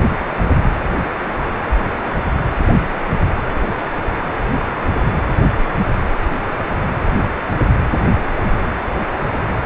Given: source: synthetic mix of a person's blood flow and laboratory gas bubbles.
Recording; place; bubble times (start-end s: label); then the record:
Doppler ultrasound of blood flow; precordium
no bubbles
From the record:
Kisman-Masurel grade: 000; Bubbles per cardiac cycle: 0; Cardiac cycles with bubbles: 0%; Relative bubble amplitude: no bubbles discernible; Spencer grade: 0 (complete lack of bubble signals)